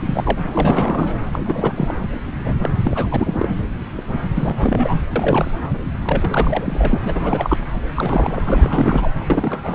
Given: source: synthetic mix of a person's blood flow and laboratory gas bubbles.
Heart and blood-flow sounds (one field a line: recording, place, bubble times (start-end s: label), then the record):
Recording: Doppler ultrasound of blood flow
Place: subclavian vein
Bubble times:
0.05-0.37 s: bubbles
0.53-1.23 s: bubbles
1.33-1.40 s: bubbles
1.46-1.94 s: bubbles
2.43-2.54 s: bubbles
2.60-2.71 s: bubbles
2.85-3.48 s: bubbles
3.97-4.01 s: bubbles
4.36-5.01 s: bubbles
5.16-5.51 s: bubbles
6.02-6.99 s: bubbles
7.04-7.57 s: bubbles
7.88-8.43 s: bubbles
8.45-9.09 s: bubbles
9.29-9.74 s: bubbles
From the record:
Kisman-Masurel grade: 342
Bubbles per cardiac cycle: rolling drumbeat, 9 or more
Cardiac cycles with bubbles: 100%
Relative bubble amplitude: moderate (0.250 to 0.450)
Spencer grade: 3 (all of the cardiac periods contain showers or single bubble signals, but not dominating or overriding the cardiac motion signals)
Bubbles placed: anywhere in the cardiac cycle